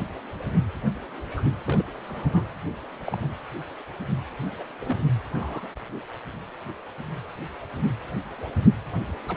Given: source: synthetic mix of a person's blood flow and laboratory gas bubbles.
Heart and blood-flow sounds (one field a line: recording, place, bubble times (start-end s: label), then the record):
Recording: Doppler ultrasound of blood flow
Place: precordium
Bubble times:
1.30-1.42 s: bubbles
1.66-1.83 s: bubbles
2.07-2.44 s: bubbles
3.05-3.17 s: bubbles
3.22-3.28 s: bubbles
4.59-4.63 s: bubbles
4.85-5.04 s: bubbles
5.34-5.68 s: bubbles
9.28-9.36 s: bubbles
From the record:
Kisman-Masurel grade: 121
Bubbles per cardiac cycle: 1 to 2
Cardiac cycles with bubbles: 10 to 50%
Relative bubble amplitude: barely perceptible (0.100 to 0.250)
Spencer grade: 2 (many but less than half of the cardiac periods contain bubble signals, singularly or in groups)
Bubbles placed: anywhere in the cardiac cycle